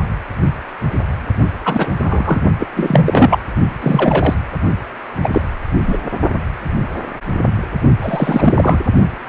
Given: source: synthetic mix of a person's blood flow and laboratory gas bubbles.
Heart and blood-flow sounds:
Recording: Doppler ultrasound of blood flow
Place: precordium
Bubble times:
1.65-1.94 s: bubbles
1.99-2.43 s: bubbles
2.59-2.68 s: bubbles
2.76-3.38 s: bubbles
3.80-4.34 s: bubbles
5.24-5.29 s: bubbles
5.33-5.42 s: bubbles
5.88-5.97 s: bubbles
8.02-8.53 s: bubbles
8.56-8.79 s: bubbles
From the record:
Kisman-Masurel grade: 233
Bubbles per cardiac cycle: several, 3 to 8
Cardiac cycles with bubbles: 50 to 99%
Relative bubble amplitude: loud (0.450 to 0.775)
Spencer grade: 3 (all of the cardiac periods contain showers or single bubble signals, but not dominating or overriding the cardiac motion signals)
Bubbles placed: only in the low amplitude regions of the cardiac cycle

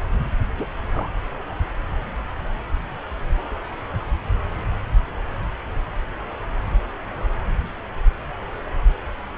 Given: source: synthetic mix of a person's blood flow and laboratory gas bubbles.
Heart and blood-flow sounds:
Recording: Doppler ultrasound of blood flow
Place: subclavian vein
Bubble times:
0.58-0.66 s: bubbles
0.94-1.09 s: bubbles
From the record:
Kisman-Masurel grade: 111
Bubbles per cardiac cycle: 1 to 2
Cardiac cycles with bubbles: 1 to 10%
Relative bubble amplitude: barely perceptible (0.100 to 0.250)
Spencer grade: 1 (occasional bubble signal discernible with the cardiac motion signal, with majority of cardiac periods free of bubbles)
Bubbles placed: anywhere in the cardiac cycle

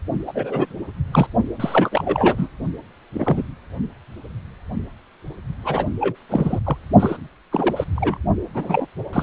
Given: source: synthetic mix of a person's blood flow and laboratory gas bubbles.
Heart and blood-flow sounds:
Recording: Doppler ultrasound of blood flow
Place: precordium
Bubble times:
0.27-0.74 s: bubbles
1.12-1.27 s: bubbles
1.59-2.48 s: bubbles
3.12-3.45 s: bubbles
5.63-5.87 s: bubbles
6.00-6.15 s: bubbles
6.29-6.59 s: bubbles
6.64-6.77 s: bubbles
7.00-7.17 s: bubbles
7.52-7.84 s: bubbles
7.96-8.19 s: bubbles
8.54-8.86 s: bubbles
9.12-9.23 s: bubbles
From the record:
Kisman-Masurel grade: 232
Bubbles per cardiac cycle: several, 3 to 8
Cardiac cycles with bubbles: 50 to 99%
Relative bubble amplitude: moderate (0.250 to 0.450)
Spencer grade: 3 (all of the cardiac periods contain showers or single bubble signals, but not dominating or overriding the cardiac motion signals)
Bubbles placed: only in the low amplitude regions of the cardiac cycle

